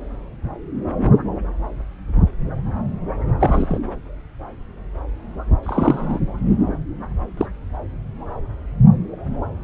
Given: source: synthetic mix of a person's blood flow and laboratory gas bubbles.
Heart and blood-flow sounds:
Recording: Doppler ultrasound of blood flow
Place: subclavian vein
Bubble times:
3.40-3.79 s: bubbles
5.63-6.19 s: bubbles
7.37-7.46 s: bubbles
From the record:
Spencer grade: 2 (many but less than half of the cardiac periods contain bubble signals, singularly or in groups)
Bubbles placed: anywhere in the cardiac cycle

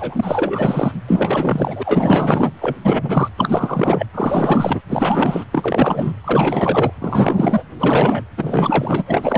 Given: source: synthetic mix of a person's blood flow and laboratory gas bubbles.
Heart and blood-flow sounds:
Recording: Doppler ultrasound of blood flow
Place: precordium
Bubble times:
0.00-0.92 s: bubbles
1.07-2.51 s: bubbles
2.60-2.76 s: bubbles
2.82-3.28 s: bubbles
3.36-4.05 s: bubbles
4.14-4.81 s: bubbles
4.89-5.44 s: bubbles
5.52-6.13 s: bubbles
6.24-6.92 s: bubbles
6.98-7.62 s: bubbles
7.77-8.25 s: bubbles
8.37-9.03 s: bubbles
9.07-9.38 s: bubbles
From the record:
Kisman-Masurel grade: 444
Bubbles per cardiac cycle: continuous sound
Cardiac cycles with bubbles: 100%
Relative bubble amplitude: maximal (0.775 to 0.999)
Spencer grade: 4 (maximum detectable bubble signal sounding continuously throughout systole and diastole of every cardiac period, and overriding the amplitude of the normal cardiac signals)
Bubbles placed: anywhere in the cardiac cycle

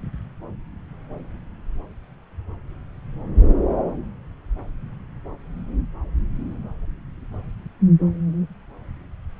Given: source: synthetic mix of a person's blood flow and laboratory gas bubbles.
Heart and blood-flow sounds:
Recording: Doppler ultrasound of blood flow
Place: subclavian vein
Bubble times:
no bubbles
From the record:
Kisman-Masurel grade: 000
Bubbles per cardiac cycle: 0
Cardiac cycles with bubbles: 0%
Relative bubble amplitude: no bubbles discernible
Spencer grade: 0 (complete lack of bubble signals)

